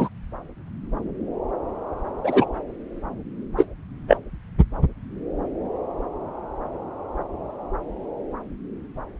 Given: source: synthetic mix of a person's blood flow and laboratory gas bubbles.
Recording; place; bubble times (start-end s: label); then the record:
Doppler ultrasound of blood flow; subclavian vein
0.00-0.08 s: bubbles
2.24-2.46 s: bubbles
3.57-3.64 s: bubbles
4.08-4.17 s: bubbles
From the record:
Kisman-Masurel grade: 123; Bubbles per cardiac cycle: 1 to 2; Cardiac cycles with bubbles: 10 to 50%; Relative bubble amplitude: loud (0.450 to 0.775); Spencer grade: 2 (many but less than half of the cardiac periods contain bubble signals, singularly or in groups); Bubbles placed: anywhere in the cardiac cycle